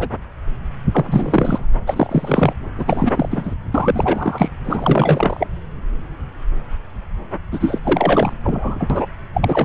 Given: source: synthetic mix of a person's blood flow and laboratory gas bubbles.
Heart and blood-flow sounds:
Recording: Doppler ultrasound of blood flow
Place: subclavian vein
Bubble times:
0.00-0.09 s: bubbles
0.91-1.65 s: bubbles
1.87-2.54 s: bubbles
2.77-3.29 s: bubbles
3.31-3.55 s: bubbles
3.74-4.49 s: bubbles
4.65-5.47 s: bubbles
7.51-7.79 s: bubbles
7.84-8.33 s: bubbles
8.43-9.06 s: bubbles
9.34-9.65 s: bubbles
From the record:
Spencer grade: 3 (all of the cardiac periods contain showers or single bubble signals, but not dominating or overriding the cardiac motion signals)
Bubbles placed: anywhere in the cardiac cycle

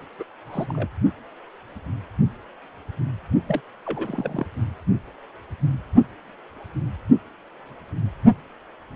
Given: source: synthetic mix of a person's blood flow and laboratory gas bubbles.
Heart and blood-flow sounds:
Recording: Doppler ultrasound of blood flow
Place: precordium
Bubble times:
0.19-0.23 s: bubbles
0.48-0.88 s: bubbles
3.47-3.60 s: bubbles
3.86-4.47 s: bubbles
From the record:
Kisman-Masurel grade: 221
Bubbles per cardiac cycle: several, 3 to 8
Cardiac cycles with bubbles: 10 to 50%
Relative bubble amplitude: barely perceptible (0.100 to 0.250)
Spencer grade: 2 (many but less than half of the cardiac periods contain bubble signals, singularly or in groups)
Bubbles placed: only in the low amplitude regions of the cardiac cycle

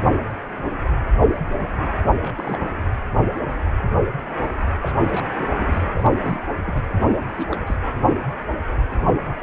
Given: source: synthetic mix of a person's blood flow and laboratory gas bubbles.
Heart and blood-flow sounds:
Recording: Doppler ultrasound of blood flow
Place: precordium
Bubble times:
2.21-2.71 s: bubbles
4.82-4.94 s: bubbles
5.10-5.25 s: bubbles
5.38-5.47 s: bubbles
5.60-5.82 s: bubbles
5.95-6.17 s: bubbles
6.22-6.40 s: bubbles
6.63-6.82 s: bubbles
7.37-7.76 s: bubbles
From the record:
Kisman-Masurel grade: 221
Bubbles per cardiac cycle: several, 3 to 8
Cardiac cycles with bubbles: 10 to 50%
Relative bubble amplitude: barely perceptible (0.100 to 0.250)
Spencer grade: 2 (many but less than half of the cardiac periods contain bubble signals, singularly or in groups)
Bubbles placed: anywhere in the cardiac cycle

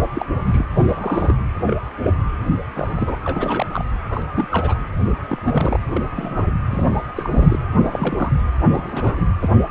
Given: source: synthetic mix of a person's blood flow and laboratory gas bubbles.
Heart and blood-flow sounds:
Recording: Doppler ultrasound of blood flow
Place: precordium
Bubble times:
0.14-0.26 s: bubbles
0.45-0.65 s: bubbles
0.77-1.35 s: bubbles
1.57-1.81 s: bubbles
2.00-2.17 s: bubbles
2.75-3.17 s: bubbles
3.25-3.85 s: bubbles
4.09-4.23 s: bubbles
4.36-4.79 s: bubbles
5.06-5.11 s: bubbles
5.28-5.79 s: bubbles
5.95-6.03 s: bubbles
6.15-6.43 s: bubbles
6.70-7.04 s: bubbles
7.17-7.58 s: bubbles
7.76-8.32 s: bubbles
8.71-9.26 s: bubbles
9.40-9.50 s: bubbles
From the record:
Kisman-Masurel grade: 242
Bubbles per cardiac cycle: several, 3 to 8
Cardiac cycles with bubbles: 100%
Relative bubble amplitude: moderate (0.250 to 0.450)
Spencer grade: 3 (all of the cardiac periods contain showers or single bubble signals, but not dominating or overriding the cardiac motion signals)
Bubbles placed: anywhere in the cardiac cycle

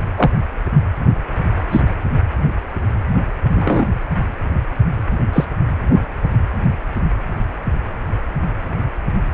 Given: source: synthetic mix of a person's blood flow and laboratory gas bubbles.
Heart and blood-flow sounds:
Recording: Doppler ultrasound of blood flow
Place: precordium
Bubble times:
0.17-0.31 s: bubbles
1.71-1.81 s: bubbles
3.54-3.86 s: bubbles
5.33-5.45 s: bubbles
From the record:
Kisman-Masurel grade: 123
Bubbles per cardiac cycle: 1 to 2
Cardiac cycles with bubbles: 10 to 50%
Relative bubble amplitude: loud (0.450 to 0.775)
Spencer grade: 2 (many but less than half of the cardiac periods contain bubble signals, singularly or in groups)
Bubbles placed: anywhere in the cardiac cycle

